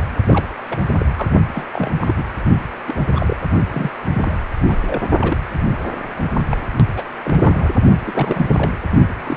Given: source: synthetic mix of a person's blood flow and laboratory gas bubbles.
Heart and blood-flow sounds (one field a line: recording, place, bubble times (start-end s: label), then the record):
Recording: Doppler ultrasound of blood flow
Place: precordium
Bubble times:
0.26-0.45 s: bubbles
0.69-0.79 s: bubbles
0.99-1.06 s: bubbles
1.17-1.28 s: bubbles
1.53-1.65 s: bubbles
1.72-1.91 s: bubbles
1.99-2.25 s: bubbles
2.86-2.94 s: bubbles
3.15-3.36 s: bubbles
3.70-3.91 s: bubbles
4.14-4.41 s: bubbles
4.68-4.76 s: bubbles
4.87-5.02 s: bubbles
5.20-5.38 s: bubbles
6.17-6.25 s: bubbles
6.52-6.57 s: bubbles
6.79-6.83 s: bubbles
6.96-7.04 s: bubbles
7.23-7.71 s: bubbles
8.06-8.72 s: bubbles
9.25-9.37 s: bubbles
From the record:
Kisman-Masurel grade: 242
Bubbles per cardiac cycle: several, 3 to 8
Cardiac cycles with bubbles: 100%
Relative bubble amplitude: moderate (0.250 to 0.450)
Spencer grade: 3 (all of the cardiac periods contain showers or single bubble signals, but not dominating or overriding the cardiac motion signals)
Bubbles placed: only in the low amplitude regions of the cardiac cycle